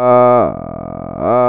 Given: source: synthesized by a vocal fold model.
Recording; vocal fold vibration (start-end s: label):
sustained vowel that changes in the middle
0.00-0.35 s: 123.7 Hz, open quotient 0.29
0.55-1.15 s: 42.5 Hz, open quotient 0.17
1.35-1.49 s: 123.7 Hz, open quotient 0.29